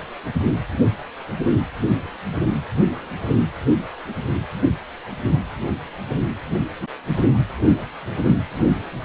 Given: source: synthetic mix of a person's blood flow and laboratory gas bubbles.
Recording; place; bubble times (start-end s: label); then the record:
Doppler ultrasound of blood flow; precordium
no bubbles
From the record:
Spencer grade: 0 (complete lack of bubble signals)